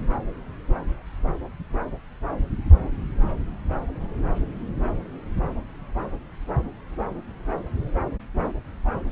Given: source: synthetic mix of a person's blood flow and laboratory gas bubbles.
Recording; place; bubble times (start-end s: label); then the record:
Doppler ultrasound of blood flow; subclavian vein
no bubbles
From the record:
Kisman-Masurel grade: 000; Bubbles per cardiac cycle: 0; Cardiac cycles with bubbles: 0%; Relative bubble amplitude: no bubbles discernible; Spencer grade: 0 (complete lack of bubble signals)